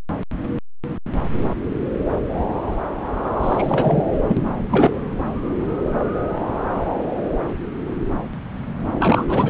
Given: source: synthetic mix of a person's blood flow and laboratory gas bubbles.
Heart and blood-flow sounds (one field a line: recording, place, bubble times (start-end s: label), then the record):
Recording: Doppler ultrasound of blood flow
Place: subclavian vein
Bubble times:
3.41-4.03 s: bubbles
4.27-4.38 s: bubbles
4.71-4.98 s: bubbles
8.99-9.50 s: bubbles
From the record:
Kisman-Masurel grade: 222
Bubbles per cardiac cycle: several, 3 to 8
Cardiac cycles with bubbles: 10 to 50%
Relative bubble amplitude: moderate (0.250 to 0.450)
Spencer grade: 2 (many but less than half of the cardiac periods contain bubble signals, singularly or in groups)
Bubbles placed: anywhere in the cardiac cycle